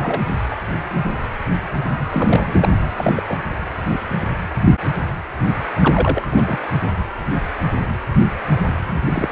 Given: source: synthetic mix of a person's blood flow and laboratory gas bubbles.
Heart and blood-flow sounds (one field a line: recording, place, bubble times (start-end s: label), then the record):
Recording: Doppler ultrasound of blood flow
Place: precordium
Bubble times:
0.00-0.24 s: bubbles
0.50-0.56 s: bubbles
2.11-2.71 s: bubbles
2.96-3.13 s: bubbles
3.17-3.23 s: bubbles
3.27-3.39 s: bubbles
5.79-6.27 s: bubbles
6.30-6.60 s: bubbles
8.51-8.62 s: bubbles
8.85-8.97 s: bubbles
9.06-9.29 s: bubbles
From the record:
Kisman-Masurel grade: 222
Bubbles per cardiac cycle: several, 3 to 8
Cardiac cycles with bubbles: 10 to 50%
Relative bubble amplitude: moderate (0.250 to 0.450)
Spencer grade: 2 (many but less than half of the cardiac periods contain bubble signals, singularly or in groups)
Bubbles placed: anywhere in the cardiac cycle